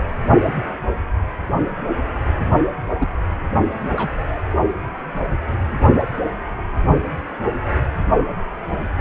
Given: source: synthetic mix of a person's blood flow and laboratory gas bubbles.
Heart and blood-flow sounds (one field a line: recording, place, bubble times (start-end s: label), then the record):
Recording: Doppler ultrasound of blood flow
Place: precordium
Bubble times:
2.98-3.08 s: bubbles
3.97-4.12 s: bubbles
4.19-4.41 s: bubbles
From the record:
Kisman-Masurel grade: 121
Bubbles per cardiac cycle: 1 to 2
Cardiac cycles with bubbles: 10 to 50%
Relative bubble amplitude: barely perceptible (0.100 to 0.250)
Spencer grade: 2 (many but less than half of the cardiac periods contain bubble signals, singularly or in groups)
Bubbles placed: only in the low amplitude regions of the cardiac cycle